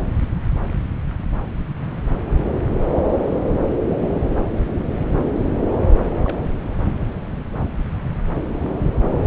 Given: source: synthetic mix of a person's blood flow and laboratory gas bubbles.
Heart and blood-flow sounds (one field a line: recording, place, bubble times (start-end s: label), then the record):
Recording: Doppler ultrasound of blood flow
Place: subclavian vein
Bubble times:
6.25-6.38 s: bubbles
7.79-7.82 s: bubbles
From the record:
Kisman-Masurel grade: 121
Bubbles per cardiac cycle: 1 to 2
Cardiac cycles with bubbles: 10 to 50%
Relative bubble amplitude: barely perceptible (0.100 to 0.250)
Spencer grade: 2 (many but less than half of the cardiac periods contain bubble signals, singularly or in groups)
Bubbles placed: anywhere in the cardiac cycle